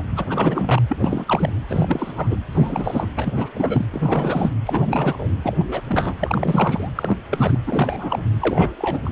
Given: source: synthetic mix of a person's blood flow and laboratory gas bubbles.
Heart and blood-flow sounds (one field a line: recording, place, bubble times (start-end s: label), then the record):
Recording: Doppler ultrasound of blood flow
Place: precordium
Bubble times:
0.00-0.03 s: bubbles
0.16-0.82 s: bubbles
0.89-0.97 s: bubbles
1.00-1.52 s: bubbles
1.68-2.36 s: bubbles
2.52-3.06 s: bubbles
3.16-3.33 s: bubbles
3.35-3.49 s: bubbles
3.54-3.86 s: bubbles
3.92-4.50 s: bubbles
4.66-5.28 s: bubbles
5.42-5.63 s: bubbles
5.68-5.82 s: bubbles
5.88-6.14 s: bubbles
6.20-6.88 s: bubbles
6.95-7.17 s: bubbles
7.30-7.59 s: bubbles
7.66-8.22 s: bubbles
8.40-8.71 s: bubbles
8.77-9.01 s: bubbles
9.05-9.09 s: bubbles
From the record:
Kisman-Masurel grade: 342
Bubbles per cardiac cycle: rolling drumbeat, 9 or more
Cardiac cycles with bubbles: 100%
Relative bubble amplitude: moderate (0.250 to 0.450)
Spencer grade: 3 (all of the cardiac periods contain showers or single bubble signals, but not dominating or overriding the cardiac motion signals)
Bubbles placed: anywhere in the cardiac cycle